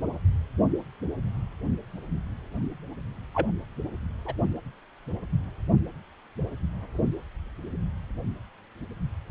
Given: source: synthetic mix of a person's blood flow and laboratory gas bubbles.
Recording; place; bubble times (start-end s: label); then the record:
Doppler ultrasound of blood flow; precordium
3.34-3.51 s: bubbles
4.25-4.33 s: bubbles
From the record:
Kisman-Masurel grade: 111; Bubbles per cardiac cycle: 1 to 2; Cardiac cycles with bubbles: 1 to 10%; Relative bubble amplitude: barely perceptible (0.100 to 0.250); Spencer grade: 1 (occasional bubble signal discernible with the cardiac motion signal, with majority of cardiac periods free of bubbles); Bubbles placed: only in the low amplitude regions of the cardiac cycle